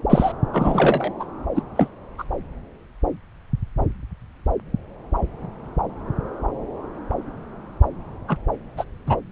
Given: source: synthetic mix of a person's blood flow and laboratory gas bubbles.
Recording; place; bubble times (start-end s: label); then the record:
Doppler ultrasound of blood flow; subclavian vein
0.09-0.32 s: bubbles
0.53-1.11 s: bubbles
1.20-1.25 s: bubbles
1.55-1.62 s: bubbles
1.75-1.88 s: bubbles
2.18-2.24 s: bubbles
8.28-8.37 s: bubbles
8.77-8.84 s: bubbles
9.06-9.16 s: bubbles
From the record:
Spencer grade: 2 (many but less than half of the cardiac periods contain bubble signals, singularly or in groups); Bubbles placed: anywhere in the cardiac cycle